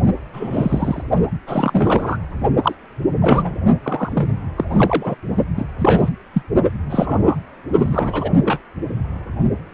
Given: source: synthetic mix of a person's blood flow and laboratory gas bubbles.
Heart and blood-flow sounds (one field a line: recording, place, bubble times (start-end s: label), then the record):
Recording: Doppler ultrasound of blood flow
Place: precordium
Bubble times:
0.33-1.03 s: bubbles
1.47-2.17 s: bubbles
2.63-2.75 s: bubbles
3.22-3.55 s: bubbles
3.83-4.30 s: bubbles
4.57-4.65 s: bubbles
4.69-5.15 s: bubbles
5.56-5.64 s: bubbles
5.78-6.09 s: bubbles
6.33-6.42 s: bubbles
6.89-7.36 s: bubbles
7.78-8.30 s: bubbles
8.44-8.60 s: bubbles
From the record:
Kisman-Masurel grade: 242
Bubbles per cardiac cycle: several, 3 to 8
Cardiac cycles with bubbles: 100%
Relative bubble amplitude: moderate (0.250 to 0.450)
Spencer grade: 3 (all of the cardiac periods contain showers or single bubble signals, but not dominating or overriding the cardiac motion signals)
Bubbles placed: only in the low amplitude regions of the cardiac cycle